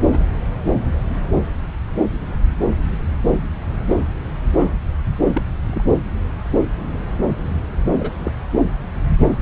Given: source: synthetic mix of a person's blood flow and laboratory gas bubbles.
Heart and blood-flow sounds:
Doppler ultrasound of blood flow; subclavian vein
0.01-0.19 s: bubbles
4.56-4.76 s: bubbles
5.33-5.42 s: bubbles
5.67-5.83 s: bubbles
7.99-8.12 s: bubbles
8.17-8.32 s: bubbles
From the record:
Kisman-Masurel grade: 122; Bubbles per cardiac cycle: 1 to 2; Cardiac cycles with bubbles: 10 to 50%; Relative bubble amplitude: moderate (0.250 to 0.450); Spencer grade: 2 (many but less than half of the cardiac periods contain bubble signals, singularly or in groups); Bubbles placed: anywhere in the cardiac cycle

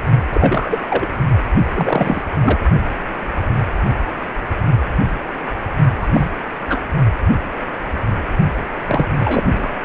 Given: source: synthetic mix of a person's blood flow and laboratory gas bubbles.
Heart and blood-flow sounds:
Doppler ultrasound of blood flow; precordium
0.32-0.80 s: bubbles
0.90-1.06 s: bubbles
1.74-2.22 s: bubbles
2.42-2.59 s: bubbles
6.01-6.08 s: bubbles
6.13-6.31 s: bubbles
6.69-6.79 s: bubbles
8.88-9.08 s: bubbles
9.19-9.71 s: bubbles
From the record:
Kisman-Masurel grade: 233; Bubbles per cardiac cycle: several, 3 to 8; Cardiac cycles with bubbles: 50 to 99%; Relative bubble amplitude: loud (0.450 to 0.775); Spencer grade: 3 (all of the cardiac periods contain showers or single bubble signals, but not dominating or overriding the cardiac motion signals); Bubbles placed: only in the low amplitude regions of the cardiac cycle

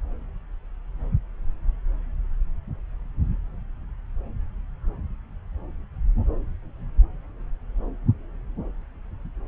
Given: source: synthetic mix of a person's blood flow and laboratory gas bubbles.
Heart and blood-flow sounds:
Doppler ultrasound of blood flow; subclavian vein
no bubbles
From the record:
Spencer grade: 0 (complete lack of bubble signals)

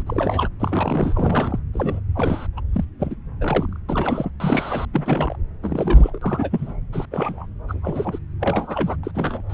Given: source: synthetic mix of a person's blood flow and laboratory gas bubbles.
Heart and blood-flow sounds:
Doppler ultrasound of blood flow; subclavian vein
0.00-0.02 s: bubbles
0.06-0.48 s: bubbles
0.59-1.59 s: bubbles
1.74-2.00 s: bubbles
2.15-2.47 s: bubbles
2.56-2.60 s: bubbles
2.73-2.85 s: bubbles
3.00-3.16 s: bubbles
3.41-3.77 s: bubbles
3.88-4.30 s: bubbles
4.40-4.85 s: bubbles
4.93-5.36 s: bubbles
5.62-6.19 s: bubbles
6.21-6.76 s: bubbles
6.92-7.05 s: bubbles
7.11-7.46 s: bubbles
7.68-8.19 s: bubbles
8.40-8.96 s: bubbles
9.03-9.11 s: bubbles
9.14-9.42 s: bubbles
9.49-9.54 s: bubbles
From the record:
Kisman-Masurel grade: 242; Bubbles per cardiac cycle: several, 3 to 8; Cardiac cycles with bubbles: 100%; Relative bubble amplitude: moderate (0.250 to 0.450); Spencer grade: 3 (all of the cardiac periods contain showers or single bubble signals, but not dominating or overriding the cardiac motion signals); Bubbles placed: anywhere in the cardiac cycle

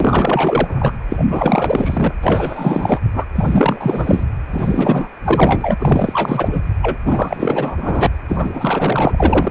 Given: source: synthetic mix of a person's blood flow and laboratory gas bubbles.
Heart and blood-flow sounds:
Doppler ultrasound of blood flow; precordium
0.00-0.94 s: bubbles
1.09-1.26 s: bubbles
1.28-2.12 s: bubbles
2.21-2.99 s: bubbles
3.14-3.25 s: bubbles
3.35-4.24 s: bubbles
4.50-5.09 s: bubbles
5.24-5.75 s: bubbles
5.79-6.61 s: bubbles
6.82-6.98 s: bubbles
7.05-8.09 s: bubbles
8.28-9.50 s: bubbles
From the record:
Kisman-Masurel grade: 444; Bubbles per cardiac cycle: continuous sound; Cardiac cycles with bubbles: 100%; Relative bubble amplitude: maximal (0.775 to 0.999); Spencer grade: 4 (maximum detectable bubble signal sounding continuously throughout systole and diastole of every cardiac period, and overriding the amplitude of the normal cardiac signals); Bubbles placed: anywhere in the cardiac cycle

